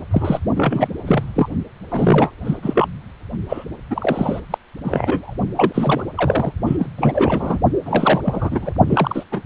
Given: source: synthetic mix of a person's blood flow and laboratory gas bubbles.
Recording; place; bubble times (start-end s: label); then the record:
Doppler ultrasound of blood flow; precordium
0.11-0.39 s: bubbles
0.56-0.88 s: bubbles
0.94-1.24 s: bubbles
1.34-1.48 s: bubbles
1.91-2.31 s: bubbles
2.44-2.58 s: bubbles
2.62-2.88 s: bubbles
3.48-3.65 s: bubbles
3.90-4.40 s: bubbles
4.50-4.58 s: bubbles
4.84-5.34 s: bubbles
5.55-6.03 s: bubbles
6.17-6.53 s: bubbles
6.66-6.88 s: bubbles
6.96-7.60 s: bubbles
7.85-8.21 s: bubbles
8.23-8.73 s: bubbles
8.89-9.24 s: bubbles
9.31-9.44 s: bubbles
From the record:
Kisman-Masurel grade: 332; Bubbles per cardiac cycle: rolling drumbeat, 9 or more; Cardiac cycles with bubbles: 50 to 99%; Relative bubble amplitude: moderate (0.250 to 0.450); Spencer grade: 3 (all of the cardiac periods contain showers or single bubble signals, but not dominating or overriding the cardiac motion signals); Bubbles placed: only in the low amplitude regions of the cardiac cycle